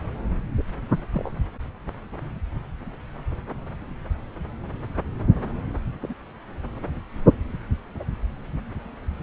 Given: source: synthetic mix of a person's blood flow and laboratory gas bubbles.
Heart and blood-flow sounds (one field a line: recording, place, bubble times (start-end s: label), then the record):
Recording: Doppler ultrasound of blood flow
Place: subclavian vein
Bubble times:
0.57-0.63 s: bubbles
1.12-1.31 s: bubbles
6.00-6.14 s: bubbles
From the record:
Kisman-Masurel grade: 121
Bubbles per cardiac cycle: 1 to 2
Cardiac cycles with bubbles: 10 to 50%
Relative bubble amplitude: barely perceptible (0.100 to 0.250)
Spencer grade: 2 (many but less than half of the cardiac periods contain bubble signals, singularly or in groups)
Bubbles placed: anywhere in the cardiac cycle